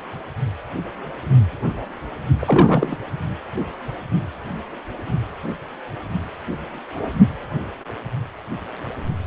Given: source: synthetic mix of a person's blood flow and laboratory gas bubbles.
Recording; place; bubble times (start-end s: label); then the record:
Doppler ultrasound of blood flow; precordium
2.40-2.97 s: bubbles
From the record:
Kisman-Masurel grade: 212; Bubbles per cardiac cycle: several, 3 to 8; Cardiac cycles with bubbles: 1 to 10%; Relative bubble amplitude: moderate (0.250 to 0.450); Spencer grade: 1 (occasional bubble signal discernible with the cardiac motion signal, with majority of cardiac periods free of bubbles); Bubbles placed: only in the low amplitude regions of the cardiac cycle